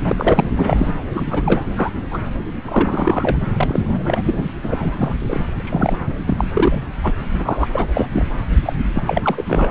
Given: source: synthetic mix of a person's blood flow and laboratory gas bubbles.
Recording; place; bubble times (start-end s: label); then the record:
Doppler ultrasound of blood flow; subclavian vein
0.04-0.49 s: bubbles
0.54-0.93 s: bubbles
1.14-1.62 s: bubbles
1.76-1.90 s: bubbles
2.10-2.18 s: bubbles
2.63-3.37 s: bubbles
3.56-4.21 s: bubbles
4.24-4.50 s: bubbles
4.63-5.13 s: bubbles
5.19-5.39 s: bubbles
5.59-5.97 s: bubbles
6.25-6.46 s: bubbles
6.53-6.83 s: bubbles
7.03-7.14 s: bubbles
7.38-7.67 s: bubbles
7.72-7.87 s: bubbles
7.96-8.09 s: bubbles
8.12-8.26 s: bubbles
8.63-8.74 s: bubbles
8.94-9.03 s: bubbles
9.05-9.43 s: bubbles
9.47-9.71 s: bubbles
From the record:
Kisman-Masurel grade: 243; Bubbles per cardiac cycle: several, 3 to 8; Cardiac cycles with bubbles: 100%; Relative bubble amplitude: loud (0.450 to 0.775); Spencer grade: 3 (all of the cardiac periods contain showers or single bubble signals, but not dominating or overriding the cardiac motion signals); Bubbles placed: anywhere in the cardiac cycle